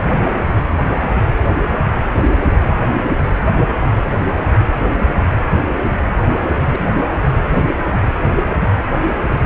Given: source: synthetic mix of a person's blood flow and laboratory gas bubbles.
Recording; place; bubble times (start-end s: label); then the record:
Doppler ultrasound of blood flow; precordium
0.11-0.34 s: bubbles
1.38-1.42 s: bubbles
6.72-6.90 s: bubbles
7.54-7.78 s: bubbles
9.07-9.11 s: bubbles
9.30-9.39 s: bubbles
From the record:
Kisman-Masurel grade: 121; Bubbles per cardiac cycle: 1 to 2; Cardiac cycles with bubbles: 10 to 50%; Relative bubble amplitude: barely perceptible (0.100 to 0.250); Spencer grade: 2 (many but less than half of the cardiac periods contain bubble signals, singularly or in groups); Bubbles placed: anywhere in the cardiac cycle